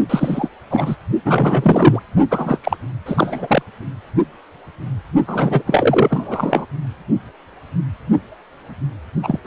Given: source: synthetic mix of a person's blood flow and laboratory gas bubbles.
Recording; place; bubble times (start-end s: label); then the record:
Doppler ultrasound of blood flow; precordium
0.10-0.49 s: bubbles
0.70-0.95 s: bubbles
1.25-2.00 s: bubbles
2.31-2.58 s: bubbles
2.64-2.77 s: bubbles
3.06-3.62 s: bubbles
5.27-5.62 s: bubbles
5.66-6.66 s: bubbles
9.22-9.39 s: bubbles
9.44-9.47 s: bubbles
From the record:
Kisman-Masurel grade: 333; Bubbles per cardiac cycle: rolling drumbeat, 9 or more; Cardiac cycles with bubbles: 50 to 99%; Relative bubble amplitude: loud (0.450 to 0.775); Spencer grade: 3 (all of the cardiac periods contain showers or single bubble signals, but not dominating or overriding the cardiac motion signals); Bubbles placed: only in the low amplitude regions of the cardiac cycle